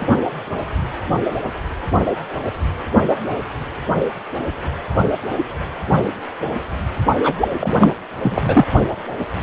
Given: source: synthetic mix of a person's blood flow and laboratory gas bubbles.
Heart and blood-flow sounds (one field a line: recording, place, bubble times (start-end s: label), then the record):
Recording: Doppler ultrasound of blood flow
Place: precordium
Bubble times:
7.23-7.34 s: bubbles
7.41-7.48 s: bubbles
7.60-7.92 s: bubbles
8.16-8.67 s: bubbles
From the record:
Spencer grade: 2 (many but less than half of the cardiac periods contain bubble signals, singularly or in groups)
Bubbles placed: anywhere in the cardiac cycle